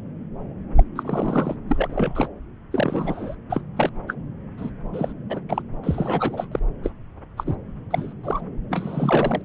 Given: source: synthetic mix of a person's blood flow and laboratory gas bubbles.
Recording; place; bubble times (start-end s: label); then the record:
Doppler ultrasound of blood flow; subclavian vein
0.76-0.83 s: bubbles
0.96-1.56 s: bubbles
1.69-2.28 s: bubbles
2.71-3.35 s: bubbles
3.49-3.61 s: bubbles
3.76-3.90 s: bubbles
4.07-4.14 s: bubbles
4.58-4.70 s: bubbles
4.93-5.13 s: bubbles
5.29-5.40 s: bubbles
5.49-5.62 s: bubbles
5.83-6.47 s: bubbles
6.51-6.59 s: bubbles
6.83-6.91 s: bubbles
7.37-7.55 s: bubbles
7.90-8.12 s: bubbles
8.24-8.41 s: bubbles
8.70-9.42 s: bubbles
From the record:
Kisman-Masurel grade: 232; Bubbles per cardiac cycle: several, 3 to 8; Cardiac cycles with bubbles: 50 to 99%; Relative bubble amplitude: moderate (0.250 to 0.450); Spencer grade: 3 (all of the cardiac periods contain showers or single bubble signals, but not dominating or overriding the cardiac motion signals); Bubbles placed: anywhere in the cardiac cycle